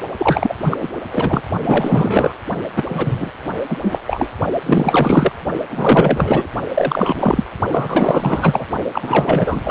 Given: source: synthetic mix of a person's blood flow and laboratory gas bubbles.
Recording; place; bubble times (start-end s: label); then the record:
Doppler ultrasound of blood flow; precordium
0.18-0.54 s: bubbles
0.58-0.77 s: bubbles
0.80-0.91 s: bubbles
0.95-1.01 s: bubbles
1.11-1.41 s: bubbles
1.63-2.33 s: bubbles
2.75-2.83 s: bubbles
2.88-3.31 s: bubbles
3.69-3.77 s: bubbles
3.81-3.98 s: bubbles
4.07-4.29 s: bubbles
4.66-5.32 s: bubbles
5.70-6.48 s: bubbles
6.74-7.47 s: bubbles
7.71-8.67 s: bubbles
8.93-9.71 s: bubbles
From the record:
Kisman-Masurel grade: 444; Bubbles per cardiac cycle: continuous sound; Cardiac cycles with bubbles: 100%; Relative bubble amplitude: maximal (0.775 to 0.999); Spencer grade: 4 (maximum detectable bubble signal sounding continuously throughout systole and diastole of every cardiac period, and overriding the amplitude of the normal cardiac signals); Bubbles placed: only in the low amplitude regions of the cardiac cycle